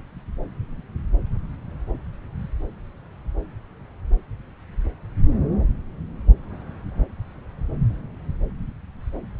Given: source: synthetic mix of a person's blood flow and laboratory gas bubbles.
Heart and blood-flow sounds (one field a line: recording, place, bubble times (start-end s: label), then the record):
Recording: Doppler ultrasound of blood flow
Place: subclavian vein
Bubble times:
no bubbles
From the record:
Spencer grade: 0 (complete lack of bubble signals)